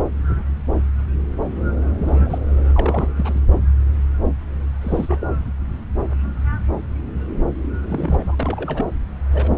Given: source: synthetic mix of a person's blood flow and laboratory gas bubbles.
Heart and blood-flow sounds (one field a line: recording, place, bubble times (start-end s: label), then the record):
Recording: Doppler ultrasound of blood flow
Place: subclavian vein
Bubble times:
1.98-2.38 s: bubbles
2.75-3.09 s: bubbles
3.16-3.41 s: bubbles
4.81-5.28 s: bubbles
7.89-8.36 s: bubbles
8.40-8.86 s: bubbles
9.31-9.58 s: bubbles
From the record:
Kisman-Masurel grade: 221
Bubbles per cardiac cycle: several, 3 to 8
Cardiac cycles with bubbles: 10 to 50%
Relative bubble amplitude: barely perceptible (0.100 to 0.250)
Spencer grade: 2 (many but less than half of the cardiac periods contain bubble signals, singularly or in groups)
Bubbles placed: anywhere in the cardiac cycle